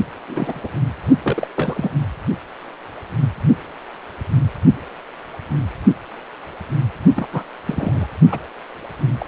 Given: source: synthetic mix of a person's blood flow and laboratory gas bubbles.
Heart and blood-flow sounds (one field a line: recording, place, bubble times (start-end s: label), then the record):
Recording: Doppler ultrasound of blood flow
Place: precordium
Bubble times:
0.28-0.71 s: bubbles
1.23-1.48 s: bubbles
1.55-1.90 s: bubbles
7.15-7.26 s: bubbles
7.31-7.43 s: bubbles
7.66-8.06 s: bubbles
8.31-8.39 s: bubbles
9.19-9.28 s: bubbles
From the record:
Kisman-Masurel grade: 222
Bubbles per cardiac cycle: several, 3 to 8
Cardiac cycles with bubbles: 10 to 50%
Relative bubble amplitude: moderate (0.250 to 0.450)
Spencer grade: 2 (many but less than half of the cardiac periods contain bubble signals, singularly or in groups)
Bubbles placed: only in the low amplitude regions of the cardiac cycle